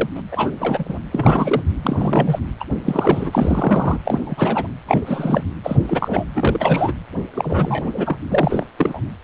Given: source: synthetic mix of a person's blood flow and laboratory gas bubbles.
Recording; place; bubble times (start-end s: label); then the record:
Doppler ultrasound of blood flow; precordium
0.00-0.09 s: bubbles
0.15-0.21 s: bubbles
0.31-0.84 s: bubbles
0.89-0.99 s: bubbles
1.11-1.62 s: bubbles
1.83-2.39 s: bubbles
2.60-2.64 s: bubbles
2.84-3.99 s: bubbles
4.05-4.20 s: bubbles
4.25-4.68 s: bubbles
4.87-5.44 s: bubbles
5.63-5.77 s: bubbles
5.83-6.25 s: bubbles
6.35-6.92 s: bubbles
7.33-7.90 s: bubbles
7.93-8.17 s: bubbles
8.30-8.67 s: bubbles
8.78-9.00 s: bubbles
From the record:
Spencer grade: 3 (all of the cardiac periods contain showers or single bubble signals, but not dominating or overriding the cardiac motion signals); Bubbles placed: anywhere in the cardiac cycle